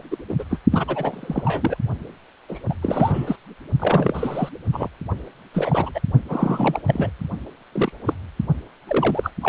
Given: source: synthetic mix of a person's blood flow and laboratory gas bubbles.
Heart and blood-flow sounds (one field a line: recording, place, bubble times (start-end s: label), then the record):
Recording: Doppler ultrasound of blood flow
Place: precordium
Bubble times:
0.11-0.17 s: bubbles
0.29-0.34 s: bubbles
0.39-0.44 s: bubbles
0.50-0.58 s: bubbles
0.71-1.77 s: bubbles
2.49-2.59 s: bubbles
2.70-2.74 s: bubbles
2.83-3.37 s: bubbles
3.79-4.49 s: bubbles
4.72-4.88 s: bubbles
5.53-5.92 s: bubbles
5.94-6.00 s: bubbles
6.28-6.81 s: bubbles
6.86-7.10 s: bubbles
7.72-7.92 s: bubbles
8.05-8.14 s: bubbles
8.88-9.30 s: bubbles
9.41-9.48 s: bubbles
From the record:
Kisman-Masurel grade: 242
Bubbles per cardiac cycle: several, 3 to 8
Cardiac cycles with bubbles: 100%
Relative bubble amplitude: moderate (0.250 to 0.450)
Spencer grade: 3 (all of the cardiac periods contain showers or single bubble signals, but not dominating or overriding the cardiac motion signals)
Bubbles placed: only in the low amplitude regions of the cardiac cycle